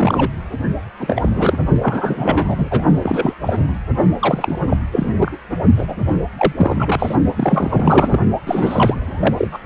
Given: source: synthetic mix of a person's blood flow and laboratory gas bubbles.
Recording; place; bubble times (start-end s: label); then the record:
Doppler ultrasound of blood flow; precordium
0.00-0.30 s: bubbles
0.98-1.58 s: bubbles
1.82-2.85 s: bubbles
3.02-3.33 s: bubbles
3.43-3.64 s: bubbles
3.68-3.74 s: bubbles
4.20-4.59 s: bubbles
4.67-4.76 s: bubbles
4.92-5.09 s: bubbles
5.16-5.38 s: bubbles
5.50-5.57 s: bubbles
5.76-5.96 s: bubbles
6.38-6.52 s: bubbles
6.56-7.16 s: bubbles
7.36-8.20 s: bubbles
8.46-9.58 s: bubbles
From the record:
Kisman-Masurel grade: 343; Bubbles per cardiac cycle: rolling drumbeat, 9 or more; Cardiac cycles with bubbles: 100%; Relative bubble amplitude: loud (0.450 to 0.775); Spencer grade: 3 (all of the cardiac periods contain showers or single bubble signals, but not dominating or overriding the cardiac motion signals); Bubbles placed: only in the low amplitude regions of the cardiac cycle